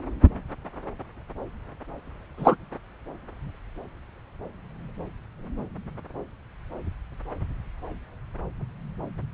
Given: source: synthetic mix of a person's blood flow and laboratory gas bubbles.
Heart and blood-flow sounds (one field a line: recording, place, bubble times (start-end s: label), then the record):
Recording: Doppler ultrasound of blood flow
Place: subclavian vein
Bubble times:
2.38-2.55 s: bubbles
From the record:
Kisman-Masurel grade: 113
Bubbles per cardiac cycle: 1 to 2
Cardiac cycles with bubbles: 1 to 10%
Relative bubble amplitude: loud (0.450 to 0.775)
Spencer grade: 1 (occasional bubble signal discernible with the cardiac motion signal, with majority of cardiac periods free of bubbles)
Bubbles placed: anywhere in the cardiac cycle